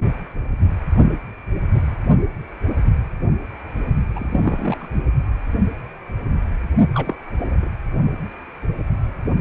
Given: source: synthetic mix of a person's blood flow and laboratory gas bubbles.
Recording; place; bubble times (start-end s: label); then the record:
Doppler ultrasound of blood flow; precordium
4.15-4.88 s: bubbles
4.93-4.99 s: bubbles
6.94-7.16 s: bubbles
7.38-7.68 s: bubbles
From the record:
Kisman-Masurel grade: 221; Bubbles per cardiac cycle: several, 3 to 8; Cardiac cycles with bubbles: 10 to 50%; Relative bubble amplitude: barely perceptible (0.100 to 0.250); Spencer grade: 2 (many but less than half of the cardiac periods contain bubble signals, singularly or in groups); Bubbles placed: only in the low amplitude regions of the cardiac cycle